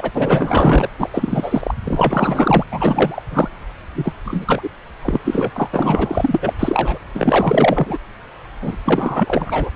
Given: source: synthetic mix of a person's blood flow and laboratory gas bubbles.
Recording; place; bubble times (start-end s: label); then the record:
Doppler ultrasound of blood flow; subclavian vein
0.00-0.11 s: bubbles
0.14-0.88 s: bubbles
0.98-1.09 s: bubbles
1.13-1.74 s: bubbles
1.85-2.63 s: bubbles
2.70-3.23 s: bubbles
3.31-3.48 s: bubbles
3.95-4.15 s: bubbles
4.25-4.69 s: bubbles
5.02-5.21 s: bubbles
5.24-5.51 s: bubbles
5.56-6.39 s: bubbles
6.43-6.53 s: bubbles
6.59-6.99 s: bubbles
7.15-7.98 s: bubbles
8.62-8.76 s: bubbles
8.84-9.71 s: bubbles
From the record:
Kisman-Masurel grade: 444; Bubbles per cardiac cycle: continuous sound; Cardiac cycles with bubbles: 100%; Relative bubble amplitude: maximal (0.775 to 0.999); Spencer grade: 4 (maximum detectable bubble signal sounding continuously throughout systole and diastole of every cardiac period, and overriding the amplitude of the normal cardiac signals); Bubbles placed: anywhere in the cardiac cycle